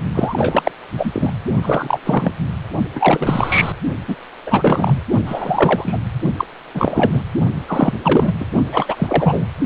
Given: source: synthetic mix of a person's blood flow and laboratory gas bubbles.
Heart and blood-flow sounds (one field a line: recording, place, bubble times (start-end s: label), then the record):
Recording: Doppler ultrasound of blood flow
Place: precordium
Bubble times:
0.14-0.71 s: bubbles
0.97-1.31 s: bubbles
1.62-2.01 s: bubbles
2.04-2.32 s: bubbles
2.95-3.72 s: bubbles
4.08-4.17 s: bubbles
4.46-5.04 s: bubbles
5.26-5.99 s: bubbles
6.38-6.45 s: bubbles
6.74-7.23 s: bubbles
7.68-7.97 s: bubbles
8.03-8.33 s: bubbles
8.39-8.45 s: bubbles
8.72-9.47 s: bubbles
From the record:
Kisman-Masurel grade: 343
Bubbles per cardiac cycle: rolling drumbeat, 9 or more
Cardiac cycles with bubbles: 100%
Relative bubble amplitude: loud (0.450 to 0.775)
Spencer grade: 3 (all of the cardiac periods contain showers or single bubble signals, but not dominating or overriding the cardiac motion signals)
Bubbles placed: only in the low amplitude regions of the cardiac cycle